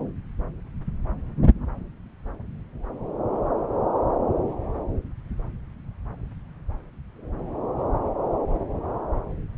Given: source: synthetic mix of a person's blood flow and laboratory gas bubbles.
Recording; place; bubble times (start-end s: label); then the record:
Doppler ultrasound of blood flow; subclavian vein
no bubbles
From the record:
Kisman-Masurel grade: 000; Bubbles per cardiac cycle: 0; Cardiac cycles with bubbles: 0%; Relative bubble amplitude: no bubbles discernible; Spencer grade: 0 (complete lack of bubble signals)